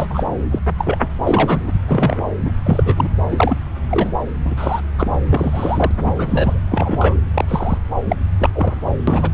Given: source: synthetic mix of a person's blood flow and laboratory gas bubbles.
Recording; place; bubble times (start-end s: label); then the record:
Doppler ultrasound of blood flow; subclavian vein
0.00-0.07 s: bubbles
0.10-0.25 s: bubbles
0.51-0.59 s: bubbles
0.78-1.07 s: bubbles
1.20-1.71 s: bubbles
1.87-2.22 s: bubbles
2.45-2.52 s: bubbles
2.64-3.08 s: bubbles
3.31-3.56 s: bubbles
3.90-4.14 s: bubbles
4.45-4.82 s: bubbles
4.98-5.14 s: bubbles
5.28-5.91 s: bubbles
6.05-6.60 s: bubbles
6.71-7.15 s: bubbles
7.34-7.45 s: bubbles
7.48-7.78 s: bubbles
8.08-8.16 s: bubbles
8.38-8.81 s: bubbles
9.07-9.30 s: bubbles
From the record:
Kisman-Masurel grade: 243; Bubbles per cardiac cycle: several, 3 to 8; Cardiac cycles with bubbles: 100%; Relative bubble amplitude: loud (0.450 to 0.775); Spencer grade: 3 (all of the cardiac periods contain showers or single bubble signals, but not dominating or overriding the cardiac motion signals); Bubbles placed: anywhere in the cardiac cycle